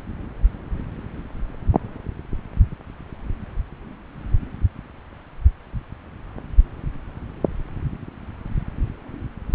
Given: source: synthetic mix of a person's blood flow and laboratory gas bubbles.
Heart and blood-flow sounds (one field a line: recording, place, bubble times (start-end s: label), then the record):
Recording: Doppler ultrasound of blood flow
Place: subclavian vein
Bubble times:
no bubbles
From the record:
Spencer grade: 0 (complete lack of bubble signals)